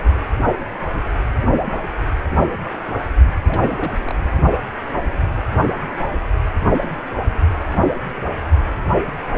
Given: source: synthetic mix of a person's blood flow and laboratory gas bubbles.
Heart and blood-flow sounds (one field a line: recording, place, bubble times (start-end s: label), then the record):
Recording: Doppler ultrasound of blood flow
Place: precordium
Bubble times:
3.44-3.92 s: bubbles
3.99-4.16 s: bubbles
4.19-4.27 s: bubbles
From the record:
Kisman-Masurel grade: 211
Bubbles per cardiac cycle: several, 3 to 8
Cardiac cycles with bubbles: 1 to 10%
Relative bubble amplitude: barely perceptible (0.100 to 0.250)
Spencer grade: 1 (occasional bubble signal discernible with the cardiac motion signal, with majority of cardiac periods free of bubbles)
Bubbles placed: only in the low amplitude regions of the cardiac cycle